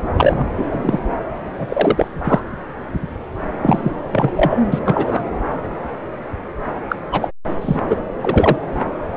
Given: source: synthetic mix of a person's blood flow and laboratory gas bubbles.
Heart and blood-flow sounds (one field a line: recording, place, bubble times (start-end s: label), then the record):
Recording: Doppler ultrasound of blood flow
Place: subclavian vein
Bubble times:
0.17-0.46 s: bubbles
0.57-0.99 s: bubbles
1.57-2.08 s: bubbles
2.24-2.41 s: bubbles
3.62-3.92 s: bubbles
4.12-4.31 s: bubbles
4.36-4.61 s: bubbles
4.72-4.79 s: bubbles
4.86-5.24 s: bubbles
6.89-6.96 s: bubbles
7.12-7.28 s: bubbles
7.61-7.79 s: bubbles
7.88-7.96 s: bubbles
8.21-8.57 s: bubbles
From the record:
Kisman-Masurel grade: 223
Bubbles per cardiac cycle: several, 3 to 8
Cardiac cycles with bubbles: 10 to 50%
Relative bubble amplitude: loud (0.450 to 0.775)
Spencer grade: 2 (many but less than half of the cardiac periods contain bubble signals, singularly or in groups)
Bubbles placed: anywhere in the cardiac cycle